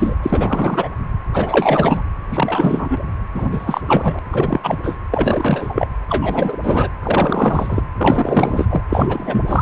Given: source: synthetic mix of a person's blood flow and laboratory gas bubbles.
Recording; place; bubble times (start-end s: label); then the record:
Doppler ultrasound of blood flow; precordium
0.00-0.15 s: bubbles
0.22-0.88 s: bubbles
1.33-2.02 s: bubbles
2.31-2.97 s: bubbles
3.34-3.49 s: bubbles
3.52-3.81 s: bubbles
3.86-4.19 s: bubbles
4.32-4.60 s: bubbles
4.63-4.76 s: bubbles
4.83-4.97 s: bubbles
5.11-5.88 s: bubbles
6.09-6.58 s: bubbles
6.63-6.88 s: bubbles
7.02-7.81 s: bubbles
7.97-8.82 s: bubbles
8.89-9.61 s: bubbles
From the record:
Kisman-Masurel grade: 343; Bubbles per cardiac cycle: rolling drumbeat, 9 or more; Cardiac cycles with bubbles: 100%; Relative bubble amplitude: loud (0.450 to 0.775); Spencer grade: 3 (all of the cardiac periods contain showers or single bubble signals, but not dominating or overriding the cardiac motion signals); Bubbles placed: anywhere in the cardiac cycle